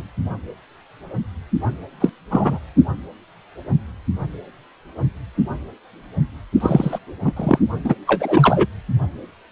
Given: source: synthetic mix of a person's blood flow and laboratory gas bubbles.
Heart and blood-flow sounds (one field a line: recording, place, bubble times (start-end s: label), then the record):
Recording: Doppler ultrasound of blood flow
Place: precordium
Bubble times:
0.00-0.02 s: bubbles
2.00-2.10 s: bubbles
2.30-2.59 s: bubbles
6.60-6.99 s: bubbles
7.24-7.33 s: bubbles
7.36-7.58 s: bubbles
7.83-7.94 s: bubbles
8.07-8.66 s: bubbles
From the record:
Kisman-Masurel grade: 233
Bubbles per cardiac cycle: several, 3 to 8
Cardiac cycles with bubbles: 50 to 99%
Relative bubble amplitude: loud (0.450 to 0.775)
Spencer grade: 3 (all of the cardiac periods contain showers or single bubble signals, but not dominating or overriding the cardiac motion signals)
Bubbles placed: only in the low amplitude regions of the cardiac cycle